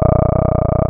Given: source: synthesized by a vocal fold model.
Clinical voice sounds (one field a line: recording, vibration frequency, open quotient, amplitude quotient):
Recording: sustained vowel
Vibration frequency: 30 Hz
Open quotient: 0.2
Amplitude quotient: 1